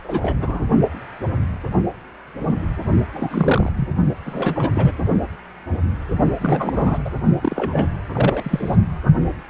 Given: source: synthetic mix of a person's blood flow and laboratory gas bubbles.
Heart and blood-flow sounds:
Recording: Doppler ultrasound of blood flow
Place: precordium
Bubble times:
0.04-0.64 s: bubbles
3.14-3.72 s: bubbles
3.77-3.89 s: bubbles
4.25-4.69 s: bubbles
4.74-4.92 s: bubbles
6.41-6.98 s: bubbles
7.04-7.10 s: bubbles
7.41-7.86 s: bubbles
8.12-8.76 s: bubbles
From the record:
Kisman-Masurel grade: 332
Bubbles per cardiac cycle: rolling drumbeat, 9 or more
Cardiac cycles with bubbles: 50 to 99%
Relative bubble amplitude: moderate (0.250 to 0.450)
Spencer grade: 3 (all of the cardiac periods contain showers or single bubble signals, but not dominating or overriding the cardiac motion signals)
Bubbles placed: only in the low amplitude regions of the cardiac cycle

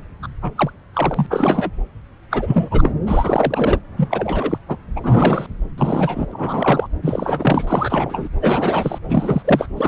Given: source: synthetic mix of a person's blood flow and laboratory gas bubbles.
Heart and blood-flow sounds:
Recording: Doppler ultrasound of blood flow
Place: subclavian vein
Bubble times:
0.22-0.27 s: bubbles
0.41-0.52 s: bubbles
0.57-0.71 s: bubbles
0.93-1.26 s: bubbles
1.30-1.70 s: bubbles
2.30-2.94 s: bubbles
3.06-3.79 s: bubbles
3.96-4.08 s: bubbles
4.10-4.58 s: bubbles
4.68-4.77 s: bubbles
4.96-5.46 s: bubbles
5.78-6.26 s: bubbles
6.31-6.88 s: bubbles
7.03-8.29 s: bubbles
8.41-8.98 s: bubbles
9.09-9.68 s: bubbles
9.77-9.88 s: bubbles
From the record:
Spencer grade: 3 (all of the cardiac periods contain showers or single bubble signals, but not dominating or overriding the cardiac motion signals)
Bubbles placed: anywhere in the cardiac cycle

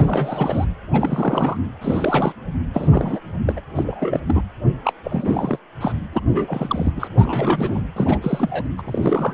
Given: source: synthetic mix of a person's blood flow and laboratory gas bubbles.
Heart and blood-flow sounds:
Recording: Doppler ultrasound of blood flow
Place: precordium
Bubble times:
0.00-0.65 s: bubbles
0.92-1.57 s: bubbles
1.81-2.32 s: bubbles
2.73-3.20 s: bubbles
3.46-3.53 s: bubbles
3.56-3.60 s: bubbles
3.75-4.21 s: bubbles
4.26-4.42 s: bubbles
4.84-4.93 s: bubbles
5.03-5.58 s: bubbles
5.80-5.92 s: bubbles
6.12-6.92 s: bubbles
6.96-7.08 s: bubbles
7.17-7.83 s: bubbles
7.96-8.19 s: bubbles
8.22-8.68 s: bubbles
8.78-9.34 s: bubbles
From the record:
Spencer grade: 3 (all of the cardiac periods contain showers or single bubble signals, but not dominating or overriding the cardiac motion signals)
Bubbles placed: anywhere in the cardiac cycle

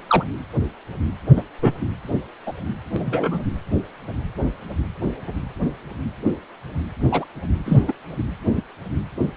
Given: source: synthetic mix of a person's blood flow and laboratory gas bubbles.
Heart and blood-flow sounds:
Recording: Doppler ultrasound of blood flow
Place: precordium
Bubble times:
0.08-0.24 s: bubbles
1.36-1.43 s: bubbles
1.62-1.71 s: bubbles
2.46-2.52 s: bubbles
2.96-3.44 s: bubbles
7.11-7.25 s: bubbles
7.65-7.80 s: bubbles
7.88-7.92 s: bubbles
8.56-8.62 s: bubbles
From the record:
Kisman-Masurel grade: 122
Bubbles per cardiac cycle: 1 to 2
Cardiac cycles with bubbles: 10 to 50%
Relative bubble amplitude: moderate (0.250 to 0.450)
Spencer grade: 2 (many but less than half of the cardiac periods contain bubble signals, singularly or in groups)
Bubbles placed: anywhere in the cardiac cycle

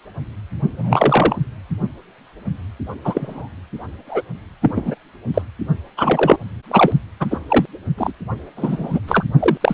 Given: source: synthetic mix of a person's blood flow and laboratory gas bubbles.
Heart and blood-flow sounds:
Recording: Doppler ultrasound of blood flow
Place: precordium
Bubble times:
0.78-1.36 s: bubbles
3.04-3.49 s: bubbles
4.08-4.21 s: bubbles
4.62-4.95 s: bubbles
5.34-5.42 s: bubbles
5.97-6.37 s: bubbles
6.71-6.92 s: bubbles
7.20-7.26 s: bubbles
7.30-7.38 s: bubbles
7.48-7.66 s: bubbles
7.97-8.12 s: bubbles
8.57-9.00 s: bubbles
9.08-9.24 s: bubbles
9.39-9.58 s: bubbles
9.61-9.74 s: bubbles
From the record:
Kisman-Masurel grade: 233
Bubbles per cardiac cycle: several, 3 to 8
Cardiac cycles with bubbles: 50 to 99%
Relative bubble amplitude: loud (0.450 to 0.775)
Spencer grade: 3 (all of the cardiac periods contain showers or single bubble signals, but not dominating or overriding the cardiac motion signals)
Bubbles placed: only in the low amplitude regions of the cardiac cycle

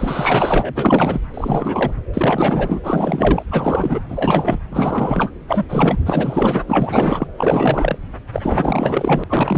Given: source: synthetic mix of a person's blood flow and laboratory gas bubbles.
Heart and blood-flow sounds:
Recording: Doppler ultrasound of blood flow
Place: subclavian vein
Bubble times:
0.00-1.21 s: bubbles
1.33-1.91 s: bubbles
2.14-2.81 s: bubbles
2.83-3.45 s: bubbles
3.48-4.04 s: bubbles
4.08-4.60 s: bubbles
4.71-5.31 s: bubbles
5.48-5.64 s: bubbles
5.69-5.98 s: bubbles
6.05-6.63 s: bubbles
6.67-7.28 s: bubbles
7.38-7.98 s: bubbles
8.32-9.24 s: bubbles
9.29-9.58 s: bubbles
From the record:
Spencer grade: 4 (maximum detectable bubble signal sounding continuously throughout systole and diastole of every cardiac period, and overriding the amplitude of the normal cardiac signals)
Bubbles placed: anywhere in the cardiac cycle

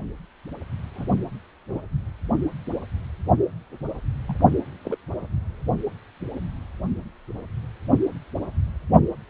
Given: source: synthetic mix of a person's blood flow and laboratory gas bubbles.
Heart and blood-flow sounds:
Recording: Doppler ultrasound of blood flow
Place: precordium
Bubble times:
0.95-1.05 s: bubbles
1.70-1.80 s: bubbles
4.26-4.38 s: bubbles
4.83-4.96 s: bubbles
From the record:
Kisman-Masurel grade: 121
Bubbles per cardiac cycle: 1 to 2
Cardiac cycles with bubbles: 10 to 50%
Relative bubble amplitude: barely perceptible (0.100 to 0.250)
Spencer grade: 2 (many but less than half of the cardiac periods contain bubble signals, singularly or in groups)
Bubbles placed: only in the low amplitude regions of the cardiac cycle

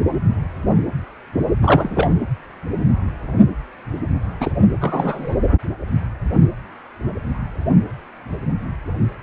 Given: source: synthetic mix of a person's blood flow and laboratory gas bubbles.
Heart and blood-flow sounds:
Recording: Doppler ultrasound of blood flow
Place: precordium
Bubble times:
1.62-2.16 s: bubbles
4.40-4.51 s: bubbles
4.80-5.35 s: bubbles
From the record:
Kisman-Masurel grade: 212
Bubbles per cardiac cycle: several, 3 to 8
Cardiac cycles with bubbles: 1 to 10%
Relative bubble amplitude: moderate (0.250 to 0.450)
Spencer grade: 1 (occasional bubble signal discernible with the cardiac motion signal, with majority of cardiac periods free of bubbles)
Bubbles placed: anywhere in the cardiac cycle

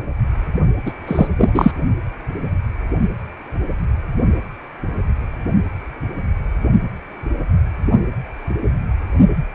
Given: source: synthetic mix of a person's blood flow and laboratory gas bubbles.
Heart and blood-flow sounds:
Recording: Doppler ultrasound of blood flow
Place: precordium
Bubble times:
0.85-0.92 s: bubbles
1.07-1.28 s: bubbles
1.38-1.71 s: bubbles
From the record:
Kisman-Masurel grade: 213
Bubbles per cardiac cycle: several, 3 to 8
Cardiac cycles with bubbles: 1 to 10%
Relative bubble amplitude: loud (0.450 to 0.775)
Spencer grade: 1 (occasional bubble signal discernible with the cardiac motion signal, with majority of cardiac periods free of bubbles)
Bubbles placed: only in the low amplitude regions of the cardiac cycle

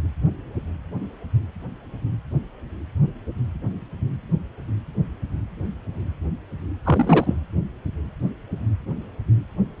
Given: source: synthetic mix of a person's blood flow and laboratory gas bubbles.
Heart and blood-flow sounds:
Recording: Doppler ultrasound of blood flow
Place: precordium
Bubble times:
6.85-7.35 s: bubbles
From the record:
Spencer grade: 1 (occasional bubble signal discernible with the cardiac motion signal, with majority of cardiac periods free of bubbles)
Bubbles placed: anywhere in the cardiac cycle

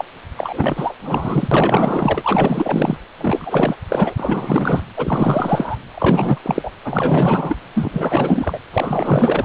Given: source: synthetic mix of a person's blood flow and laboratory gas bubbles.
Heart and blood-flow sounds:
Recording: Doppler ultrasound of blood flow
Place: precordium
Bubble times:
0.00-0.04 s: bubbles
0.35-0.95 s: bubbles
1.01-1.48 s: bubbles
1.51-2.21 s: bubbles
2.24-2.97 s: bubbles
3.18-3.75 s: bubbles
3.89-4.13 s: bubbles
4.17-4.83 s: bubbles
4.96-5.76 s: bubbles
5.94-6.39 s: bubbles
6.43-6.71 s: bubbles
6.83-7.56 s: bubbles
7.73-8.59 s: bubbles
8.73-9.45 s: bubbles
From the record:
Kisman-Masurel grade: 444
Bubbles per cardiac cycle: continuous sound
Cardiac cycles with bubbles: 100%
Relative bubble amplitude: maximal (0.775 to 0.999)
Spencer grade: 4 (maximum detectable bubble signal sounding continuously throughout systole and diastole of every cardiac period, and overriding the amplitude of the normal cardiac signals)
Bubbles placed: anywhere in the cardiac cycle

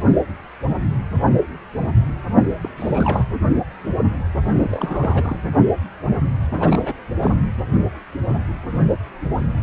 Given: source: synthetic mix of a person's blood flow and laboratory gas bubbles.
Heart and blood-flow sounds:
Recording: Doppler ultrasound of blood flow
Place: precordium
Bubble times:
2.36-2.43 s: bubbles
2.61-2.71 s: bubbles
2.77-3.24 s: bubbles
4.54-5.39 s: bubbles
6.52-6.94 s: bubbles
7.20-7.31 s: bubbles
From the record:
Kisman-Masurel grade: 332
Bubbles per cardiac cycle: rolling drumbeat, 9 or more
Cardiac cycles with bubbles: 50 to 99%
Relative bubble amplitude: moderate (0.250 to 0.450)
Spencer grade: 3 (all of the cardiac periods contain showers or single bubble signals, but not dominating or overriding the cardiac motion signals)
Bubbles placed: anywhere in the cardiac cycle

